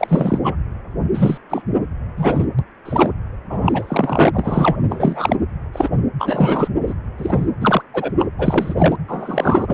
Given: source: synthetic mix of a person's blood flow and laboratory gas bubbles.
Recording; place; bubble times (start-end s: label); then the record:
Doppler ultrasound of blood flow; precordium
0.00-0.38 s: bubbles
0.43-0.55 s: bubbles
1.14-1.38 s: bubbles
1.49-1.62 s: bubbles
2.17-2.46 s: bubbles
2.58-2.64 s: bubbles
2.85-3.12 s: bubbles
3.49-4.30 s: bubbles
4.33-4.77 s: bubbles
4.90-5.36 s: bubbles
5.73-5.90 s: bubbles
6.19-6.68 s: bubbles
6.86-6.94 s: bubbles
7.17-7.48 s: bubbles
7.60-7.82 s: bubbles
7.94-8.12 s: bubbles
8.19-8.26 s: bubbles
8.38-8.74 s: bubbles
8.77-8.96 s: bubbles
9.07-9.74 s: bubbles
From the record:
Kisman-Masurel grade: 233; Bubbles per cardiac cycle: several, 3 to 8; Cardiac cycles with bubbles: 50 to 99%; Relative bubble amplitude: loud (0.450 to 0.775); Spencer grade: 3 (all of the cardiac periods contain showers or single bubble signals, but not dominating or overriding the cardiac motion signals); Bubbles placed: anywhere in the cardiac cycle